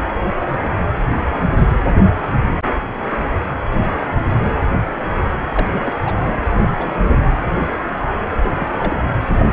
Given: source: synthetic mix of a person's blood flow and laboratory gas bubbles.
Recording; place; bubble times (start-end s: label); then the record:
Doppler ultrasound of blood flow; precordium
5.54-6.00 s: bubbles
6.05-6.16 s: bubbles
6.54-6.69 s: bubbles
6.75-6.94 s: bubbles
7.00-7.29 s: bubbles
8.44-8.51 s: bubbles
8.60-8.75 s: bubbles
8.78-8.96 s: bubbles
9.29-9.40 s: bubbles
From the record:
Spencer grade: 2 (many but less than half of the cardiac periods contain bubble signals, singularly or in groups); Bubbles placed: anywhere in the cardiac cycle